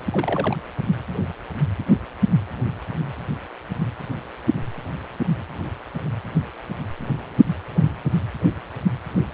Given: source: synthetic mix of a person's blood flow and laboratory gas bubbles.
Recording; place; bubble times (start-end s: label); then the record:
Doppler ultrasound of blood flow; precordium
0.12-0.57 s: bubbles
From the record:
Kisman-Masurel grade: 121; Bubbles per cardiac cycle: 1 to 2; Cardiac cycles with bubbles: 10 to 50%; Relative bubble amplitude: barely perceptible (0.100 to 0.250); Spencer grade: 2 (many but less than half of the cardiac periods contain bubble signals, singularly or in groups); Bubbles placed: only in the low amplitude regions of the cardiac cycle